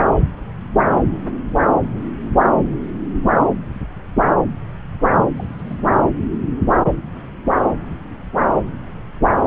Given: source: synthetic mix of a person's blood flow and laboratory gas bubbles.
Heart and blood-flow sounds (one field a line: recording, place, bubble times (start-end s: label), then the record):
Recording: Doppler ultrasound of blood flow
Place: subclavian vein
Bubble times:
5.36-5.79 s: bubbles
From the record:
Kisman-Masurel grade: 211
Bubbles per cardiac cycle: several, 3 to 8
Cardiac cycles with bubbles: 1 to 10%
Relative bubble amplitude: barely perceptible (0.100 to 0.250)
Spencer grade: 1 (occasional bubble signal discernible with the cardiac motion signal, with majority of cardiac periods free of bubbles)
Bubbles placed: anywhere in the cardiac cycle